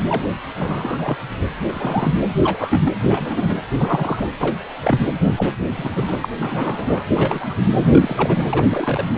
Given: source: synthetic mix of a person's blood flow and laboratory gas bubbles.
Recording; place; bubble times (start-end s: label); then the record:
Doppler ultrasound of blood flow; precordium
0.08-0.26 s: bubbles
0.54-1.17 s: bubbles
1.63-2.11 s: bubbles
2.42-2.93 s: bubbles
3.10-3.58 s: bubbles
3.77-4.27 s: bubbles
4.40-4.58 s: bubbles
4.80-5.00 s: bubbles
5.37-5.46 s: bubbles
5.61-6.28 s: bubbles
6.41-7.02 s: bubbles
7.14-7.54 s: bubbles
7.80-7.88 s: bubbles
7.92-8.44 s: bubbles
8.49-9.05 s: bubbles
From the record:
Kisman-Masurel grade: 242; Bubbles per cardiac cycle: several, 3 to 8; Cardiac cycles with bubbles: 100%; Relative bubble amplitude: moderate (0.250 to 0.450); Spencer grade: 3 (all of the cardiac periods contain showers or single bubble signals, but not dominating or overriding the cardiac motion signals); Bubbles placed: anywhere in the cardiac cycle